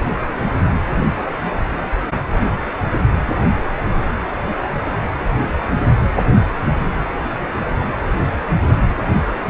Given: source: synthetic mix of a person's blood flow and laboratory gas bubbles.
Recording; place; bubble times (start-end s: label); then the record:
Doppler ultrasound of blood flow; precordium
no bubbles
From the record:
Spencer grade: 0 (complete lack of bubble signals)